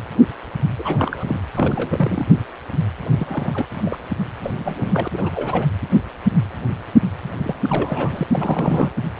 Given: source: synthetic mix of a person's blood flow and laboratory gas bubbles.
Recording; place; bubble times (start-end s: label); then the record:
Doppler ultrasound of blood flow; precordium
0.78-1.40 s: bubbles
1.54-2.27 s: bubbles
3.19-3.66 s: bubbles
3.81-3.97 s: bubbles
4.42-4.53 s: bubbles
4.58-5.08 s: bubbles
5.12-5.30 s: bubbles
5.34-5.66 s: bubbles
7.38-7.54 s: bubbles
7.62-8.23 s: bubbles
8.31-8.90 s: bubbles
From the record:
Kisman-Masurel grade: 332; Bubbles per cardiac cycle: rolling drumbeat, 9 or more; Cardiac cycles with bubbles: 50 to 99%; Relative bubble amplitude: moderate (0.250 to 0.450); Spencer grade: 3 (all of the cardiac periods contain showers or single bubble signals, but not dominating or overriding the cardiac motion signals); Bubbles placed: anywhere in the cardiac cycle